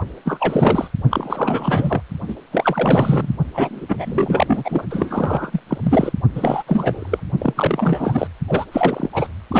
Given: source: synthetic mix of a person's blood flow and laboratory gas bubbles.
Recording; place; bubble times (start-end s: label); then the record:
Doppler ultrasound of blood flow; precordium
0.24-0.88 s: bubbles
1.10-2.02 s: bubbles
2.28-2.35 s: bubbles
2.52-3.33 s: bubbles
3.54-4.84 s: bubbles
4.90-5.61 s: bubbles
5.69-5.78 s: bubbles
5.83-6.12 s: bubbles
6.35-6.62 s: bubbles
6.67-7.23 s: bubbles
7.38-8.27 s: bubbles
8.48-8.65 s: bubbles
8.72-9.07 s: bubbles
9.12-9.26 s: bubbles
9.51-9.60 s: bubbles
From the record:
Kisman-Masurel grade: 333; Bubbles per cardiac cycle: rolling drumbeat, 9 or more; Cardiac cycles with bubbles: 50 to 99%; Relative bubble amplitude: loud (0.450 to 0.775); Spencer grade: 3 (all of the cardiac periods contain showers or single bubble signals, but not dominating or overriding the cardiac motion signals); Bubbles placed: only in the low amplitude regions of the cardiac cycle